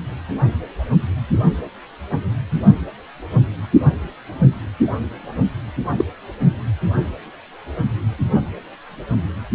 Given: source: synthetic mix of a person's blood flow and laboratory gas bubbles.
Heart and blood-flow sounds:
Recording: Doppler ultrasound of blood flow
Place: precordium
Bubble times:
5.97-6.05 s: bubbles
From the record:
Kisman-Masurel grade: 113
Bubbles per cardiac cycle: 1 to 2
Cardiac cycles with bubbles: 1 to 10%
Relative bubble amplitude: loud (0.450 to 0.775)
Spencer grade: 1 (occasional bubble signal discernible with the cardiac motion signal, with majority of cardiac periods free of bubbles)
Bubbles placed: anywhere in the cardiac cycle

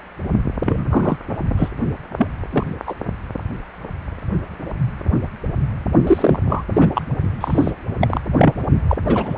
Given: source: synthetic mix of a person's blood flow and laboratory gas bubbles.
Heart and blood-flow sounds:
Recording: Doppler ultrasound of blood flow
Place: precordium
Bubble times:
0.65-0.86 s: bubbles
0.90-1.17 s: bubbles
1.57-1.69 s: bubbles
2.17-2.27 s: bubbles
2.50-2.64 s: bubbles
2.86-2.94 s: bubbles
6.06-6.39 s: bubbles
6.47-6.63 s: bubbles
6.73-6.91 s: bubbles
6.94-7.08 s: bubbles
7.41-7.71 s: bubbles
8.01-8.21 s: bubbles
8.36-8.53 s: bubbles
8.88-8.97 s: bubbles
9.05-9.38 s: bubbles
From the record:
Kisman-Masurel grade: 233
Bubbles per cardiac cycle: several, 3 to 8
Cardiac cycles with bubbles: 50 to 99%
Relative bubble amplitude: loud (0.450 to 0.775)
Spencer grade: 3 (all of the cardiac periods contain showers or single bubble signals, but not dominating or overriding the cardiac motion signals)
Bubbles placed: only in the low amplitude regions of the cardiac cycle

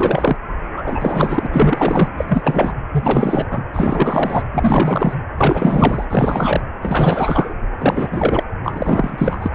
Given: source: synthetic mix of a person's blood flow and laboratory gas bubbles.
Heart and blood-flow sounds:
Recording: Doppler ultrasound of blood flow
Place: precordium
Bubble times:
0.00-0.36 s: bubbles
0.76-0.84 s: bubbles
0.86-1.46 s: bubbles
1.52-2.08 s: bubbles
2.17-2.25 s: bubbles
2.27-2.75 s: bubbles
2.92-3.48 s: bubbles
3.51-3.65 s: bubbles
3.73-4.43 s: bubbles
4.52-5.14 s: bubbles
5.37-6.05 s: bubbles
6.09-6.70 s: bubbles
6.81-7.54 s: bubbles
7.79-8.44 s: bubbles
8.63-9.48 s: bubbles
From the record:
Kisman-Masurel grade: 444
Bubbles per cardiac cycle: continuous sound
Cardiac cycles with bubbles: 100%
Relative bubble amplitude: maximal (0.775 to 0.999)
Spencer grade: 4 (maximum detectable bubble signal sounding continuously throughout systole and diastole of every cardiac period, and overriding the amplitude of the normal cardiac signals)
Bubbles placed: anywhere in the cardiac cycle

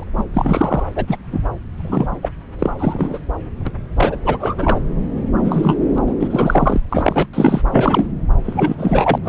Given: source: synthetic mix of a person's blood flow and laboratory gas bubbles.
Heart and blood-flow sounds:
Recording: Doppler ultrasound of blood flow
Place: subclavian vein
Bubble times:
0.00-0.04 s: bubbles
0.17-0.25 s: bubbles
0.33-0.83 s: bubbles
0.95-1.17 s: bubbles
1.31-1.41 s: bubbles
1.77-2.09 s: bubbles
2.22-2.29 s: bubbles
2.58-2.71 s: bubbles
2.78-3.19 s: bubbles
3.66-3.71 s: bubbles
3.97-4.18 s: bubbles
4.24-4.79 s: bubbles
5.45-5.76 s: bubbles
5.92-5.99 s: bubbles
6.06-6.14 s: bubbles
6.20-6.28 s: bubbles
6.30-6.81 s: bubbles
6.89-7.27 s: bubbles
7.33-7.62 s: bubbles
7.72-8.07 s: bubbles
8.44-8.75 s: bubbles
8.78-9.18 s: bubbles
9.24-9.28 s: bubbles
From the record:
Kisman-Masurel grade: 243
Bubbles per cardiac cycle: several, 3 to 8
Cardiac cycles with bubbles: 100%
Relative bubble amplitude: loud (0.450 to 0.775)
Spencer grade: 3 (all of the cardiac periods contain showers or single bubble signals, but not dominating or overriding the cardiac motion signals)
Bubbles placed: anywhere in the cardiac cycle

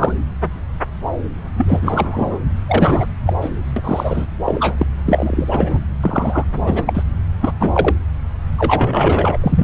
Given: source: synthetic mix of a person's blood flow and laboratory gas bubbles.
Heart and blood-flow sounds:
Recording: Doppler ultrasound of blood flow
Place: subclavian vein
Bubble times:
0.00-0.13 s: bubbles
1.56-2.38 s: bubbles
2.67-3.06 s: bubbles
3.26-3.34 s: bubbles
3.41-3.50 s: bubbles
3.76-3.81 s: bubbles
3.83-4.27 s: bubbles
4.45-4.86 s: bubbles
5.06-5.79 s: bubbles
6.02-6.45 s: bubbles
6.66-7.03 s: bubbles
7.42-7.53 s: bubbles
7.60-7.94 s: bubbles
8.58-9.38 s: bubbles
9.41-9.64 s: bubbles
From the record:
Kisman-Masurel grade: 233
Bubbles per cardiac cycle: several, 3 to 8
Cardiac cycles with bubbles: 50 to 99%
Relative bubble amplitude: loud (0.450 to 0.775)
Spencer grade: 3 (all of the cardiac periods contain showers or single bubble signals, but not dominating or overriding the cardiac motion signals)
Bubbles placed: anywhere in the cardiac cycle

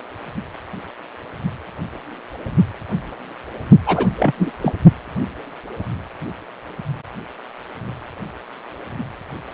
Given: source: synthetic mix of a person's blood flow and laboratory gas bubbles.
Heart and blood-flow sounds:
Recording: Doppler ultrasound of blood flow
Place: precordium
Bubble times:
3.86-4.08 s: bubbles
4.17-4.32 s: bubbles
4.38-4.51 s: bubbles
4.62-4.73 s: bubbles
From the record:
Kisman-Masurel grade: 213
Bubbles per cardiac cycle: several, 3 to 8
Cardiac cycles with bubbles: 1 to 10%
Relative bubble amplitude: loud (0.450 to 0.775)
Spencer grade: 1 (occasional bubble signal discernible with the cardiac motion signal, with majority of cardiac periods free of bubbles)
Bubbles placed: anywhere in the cardiac cycle

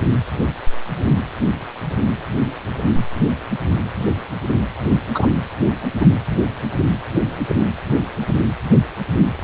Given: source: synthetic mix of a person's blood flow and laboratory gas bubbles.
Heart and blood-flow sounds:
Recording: Doppler ultrasound of blood flow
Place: precordium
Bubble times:
5.14-5.28 s: bubbles
6.00-6.06 s: bubbles
From the record:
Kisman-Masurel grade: 113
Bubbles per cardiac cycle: 1 to 2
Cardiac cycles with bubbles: 1 to 10%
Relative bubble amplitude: loud (0.450 to 0.775)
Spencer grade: 1 (occasional bubble signal discernible with the cardiac motion signal, with majority of cardiac periods free of bubbles)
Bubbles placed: anywhere in the cardiac cycle

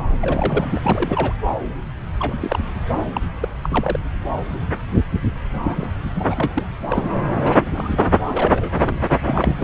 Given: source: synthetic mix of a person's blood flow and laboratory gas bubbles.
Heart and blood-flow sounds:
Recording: Doppler ultrasound of blood flow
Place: subclavian vein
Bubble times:
0.21-0.80 s: bubbles
0.83-1.33 s: bubbles
2.19-2.38 s: bubbles
2.42-2.59 s: bubbles
3.13-3.21 s: bubbles
3.40-3.48 s: bubbles
3.60-3.98 s: bubbles
5.63-5.91 s: bubbles
6.15-6.63 s: bubbles
6.87-7.25 s: bubbles
7.44-7.92 s: bubbles
8.27-8.72 s: bubbles
8.84-9.03 s: bubbles
9.19-9.64 s: bubbles
From the record:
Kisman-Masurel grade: 232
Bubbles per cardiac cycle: several, 3 to 8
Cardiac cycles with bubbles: 50 to 99%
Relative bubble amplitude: moderate (0.250 to 0.450)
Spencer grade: 3 (all of the cardiac periods contain showers or single bubble signals, but not dominating or overriding the cardiac motion signals)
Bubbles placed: anywhere in the cardiac cycle

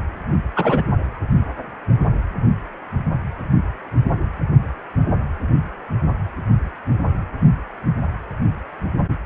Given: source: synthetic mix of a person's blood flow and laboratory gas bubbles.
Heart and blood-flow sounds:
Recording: Doppler ultrasound of blood flow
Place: precordium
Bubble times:
0.56-0.84 s: bubbles
From the record:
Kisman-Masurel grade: 113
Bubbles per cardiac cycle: 1 to 2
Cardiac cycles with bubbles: 1 to 10%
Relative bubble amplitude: loud (0.450 to 0.775)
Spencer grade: 1 (occasional bubble signal discernible with the cardiac motion signal, with majority of cardiac periods free of bubbles)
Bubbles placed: only in the low amplitude regions of the cardiac cycle

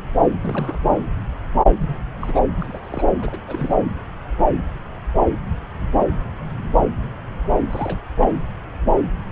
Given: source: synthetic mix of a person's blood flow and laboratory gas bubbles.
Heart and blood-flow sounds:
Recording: Doppler ultrasound of blood flow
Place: subclavian vein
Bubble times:
0.12-0.27 s: bubbles
0.42-1.00 s: bubbles
1.80-2.03 s: bubbles
2.21-2.40 s: bubbles
2.59-3.05 s: bubbles
3.21-3.40 s: bubbles
3.47-3.77 s: bubbles
7.70-7.99 s: bubbles
8.16-8.29 s: bubbles
From the record:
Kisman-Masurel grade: 221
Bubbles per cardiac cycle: several, 3 to 8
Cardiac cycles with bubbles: 10 to 50%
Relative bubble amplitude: barely perceptible (0.100 to 0.250)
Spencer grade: 2 (many but less than half of the cardiac periods contain bubble signals, singularly or in groups)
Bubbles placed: anywhere in the cardiac cycle

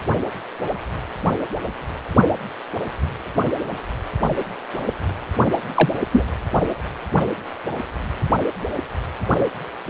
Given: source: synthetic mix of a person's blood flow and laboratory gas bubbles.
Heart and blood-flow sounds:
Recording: Doppler ultrasound of blood flow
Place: precordium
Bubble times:
5.76-5.89 s: bubbles
6.12-6.23 s: bubbles
From the record:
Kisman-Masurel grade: 123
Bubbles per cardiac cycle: 1 to 2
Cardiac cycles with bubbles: 10 to 50%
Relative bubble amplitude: loud (0.450 to 0.775)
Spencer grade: 2 (many but less than half of the cardiac periods contain bubble signals, singularly or in groups)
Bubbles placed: anywhere in the cardiac cycle

